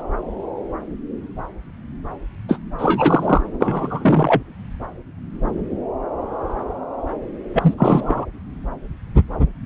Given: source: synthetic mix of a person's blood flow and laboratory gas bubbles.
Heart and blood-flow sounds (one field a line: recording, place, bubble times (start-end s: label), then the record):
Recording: Doppler ultrasound of blood flow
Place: subclavian vein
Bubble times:
0.00-0.02 s: bubbles
2.48-2.58 s: bubbles
2.78-3.42 s: bubbles
3.60-4.42 s: bubbles
7.53-7.74 s: bubbles
7.77-8.25 s: bubbles
From the record:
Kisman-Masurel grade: 233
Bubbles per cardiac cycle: several, 3 to 8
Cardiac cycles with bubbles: 50 to 99%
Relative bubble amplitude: loud (0.450 to 0.775)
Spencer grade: 3 (all of the cardiac periods contain showers or single bubble signals, but not dominating or overriding the cardiac motion signals)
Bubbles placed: anywhere in the cardiac cycle